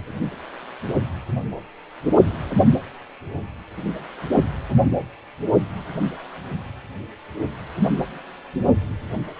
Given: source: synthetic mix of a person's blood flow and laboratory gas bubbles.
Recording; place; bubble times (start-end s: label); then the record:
Doppler ultrasound of blood flow; precordium
no bubbles
From the record:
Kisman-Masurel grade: 000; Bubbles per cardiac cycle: 0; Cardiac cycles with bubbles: 0%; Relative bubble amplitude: no bubbles discernible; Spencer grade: 0 (complete lack of bubble signals)